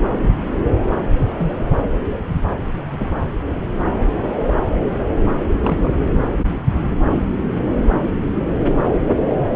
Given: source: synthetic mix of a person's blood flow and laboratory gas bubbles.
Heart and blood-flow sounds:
Doppler ultrasound of blood flow; subclavian vein
1.39-1.64 s: bubbles
2.91-3.22 s: bubbles
4.47-4.54 s: bubbles
5.60-5.94 s: bubbles
9.34-9.50 s: bubbles
From the record:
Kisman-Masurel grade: 122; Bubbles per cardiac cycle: 1 to 2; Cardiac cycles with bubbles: 10 to 50%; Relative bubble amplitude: moderate (0.250 to 0.450); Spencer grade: 2 (many but less than half of the cardiac periods contain bubble signals, singularly or in groups); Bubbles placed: anywhere in the cardiac cycle

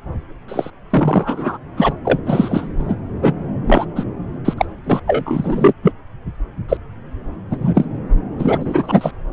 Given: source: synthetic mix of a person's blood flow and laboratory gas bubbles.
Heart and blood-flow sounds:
Doppler ultrasound of blood flow; subclavian vein
0.48-0.70 s: bubbles
0.90-1.58 s: bubbles
1.77-1.94 s: bubbles
2.04-2.19 s: bubbles
2.25-2.67 s: bubbles
2.79-2.96 s: bubbles
3.22-3.33 s: bubbles
3.66-3.85 s: bubbles
3.95-4.04 s: bubbles
4.45-4.54 s: bubbles
4.57-4.66 s: bubbles
4.84-5.00 s: bubbles
5.07-5.74 s: bubbles
5.83-5.92 s: bubbles
6.68-6.77 s: bubbles
7.50-7.57 s: bubbles
7.60-7.86 s: bubbles
8.39-9.11 s: bubbles
From the record:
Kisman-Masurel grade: 243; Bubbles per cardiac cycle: several, 3 to 8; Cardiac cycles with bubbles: 100%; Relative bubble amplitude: loud (0.450 to 0.775); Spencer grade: 3 (all of the cardiac periods contain showers or single bubble signals, but not dominating or overriding the cardiac motion signals); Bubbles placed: anywhere in the cardiac cycle

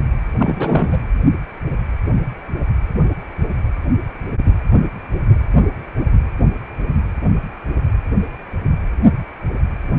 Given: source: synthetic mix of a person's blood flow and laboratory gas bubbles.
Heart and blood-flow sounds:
Doppler ultrasound of blood flow; precordium
0.39-1.01 s: bubbles
From the record:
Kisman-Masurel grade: 212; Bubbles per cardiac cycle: several, 3 to 8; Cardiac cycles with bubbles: 1 to 10%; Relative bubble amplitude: moderate (0.250 to 0.450); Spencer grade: 1 (occasional bubble signal discernible with the cardiac motion signal, with majority of cardiac periods free of bubbles); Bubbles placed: anywhere in the cardiac cycle

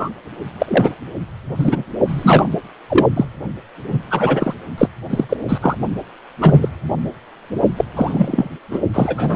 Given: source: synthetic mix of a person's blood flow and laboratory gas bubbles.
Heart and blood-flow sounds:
Doppler ultrasound of blood flow; precordium
0.00-0.10 s: bubbles
0.59-0.93 s: bubbles
1.56-1.84 s: bubbles
2.07-2.49 s: bubbles
2.89-3.06 s: bubbles
3.16-3.25 s: bubbles
3.88-3.99 s: bubbles
4.11-4.54 s: bubbles
4.78-4.88 s: bubbles
5.09-5.25 s: bubbles
5.29-5.37 s: bubbles
5.48-5.58 s: bubbles
5.61-5.76 s: bubbles
6.41-6.68 s: bubbles
7.76-7.84 s: bubbles
7.96-8.49 s: bubbles
8.70-8.79 s: bubbles
8.93-9.36 s: bubbles
From the record:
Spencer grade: 3 (all of the cardiac periods contain showers or single bubble signals, but not dominating or overriding the cardiac motion signals); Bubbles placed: only in the low amplitude regions of the cardiac cycle

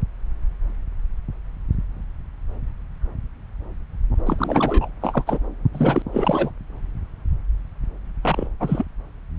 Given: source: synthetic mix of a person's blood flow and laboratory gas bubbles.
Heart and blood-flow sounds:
Doppler ultrasound of blood flow; subclavian vein
4.26-4.88 s: bubbles
5.01-5.24 s: bubbles
5.26-5.38 s: bubbles
5.73-6.02 s: bubbles
6.12-6.50 s: bubbles
8.23-8.48 s: bubbles
8.60-8.85 s: bubbles
From the record:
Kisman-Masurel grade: 222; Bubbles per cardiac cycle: several, 3 to 8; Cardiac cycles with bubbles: 10 to 50%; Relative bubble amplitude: moderate (0.250 to 0.450); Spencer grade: 2 (many but less than half of the cardiac periods contain bubble signals, singularly or in groups); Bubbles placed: anywhere in the cardiac cycle

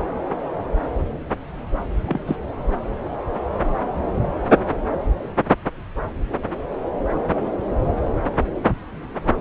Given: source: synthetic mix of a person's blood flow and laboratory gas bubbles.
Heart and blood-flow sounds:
Doppler ultrasound of blood flow; subclavian vein
2.06-2.23 s: bubbles
2.27-2.37 s: bubbles
From the record:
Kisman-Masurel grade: 112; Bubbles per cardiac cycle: 1 to 2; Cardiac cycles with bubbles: 1 to 10%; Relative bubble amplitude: moderate (0.250 to 0.450); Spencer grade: 1 (occasional bubble signal discernible with the cardiac motion signal, with majority of cardiac periods free of bubbles); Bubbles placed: anywhere in the cardiac cycle

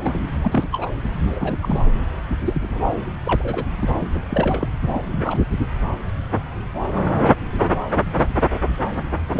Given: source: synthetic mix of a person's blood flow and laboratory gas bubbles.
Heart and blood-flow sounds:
Doppler ultrasound of blood flow; subclavian vein
0.00-0.21 s: bubbles
0.43-0.68 s: bubbles
0.72-0.88 s: bubbles
1.26-1.58 s: bubbles
1.62-1.84 s: bubbles
2.46-2.93 s: bubbles
3.25-3.65 s: bubbles
3.81-3.95 s: bubbles
4.00-4.07 s: bubbles
4.11-4.21 s: bubbles
4.30-4.68 s: bubbles
4.82-5.02 s: bubbles
5.07-5.44 s: bubbles
9.33-9.40 s: bubbles
From the record:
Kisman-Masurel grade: 232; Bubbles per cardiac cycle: several, 3 to 8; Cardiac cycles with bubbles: 50 to 99%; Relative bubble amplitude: moderate (0.250 to 0.450); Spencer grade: 3 (all of the cardiac periods contain showers or single bubble signals, but not dominating or overriding the cardiac motion signals); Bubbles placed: anywhere in the cardiac cycle

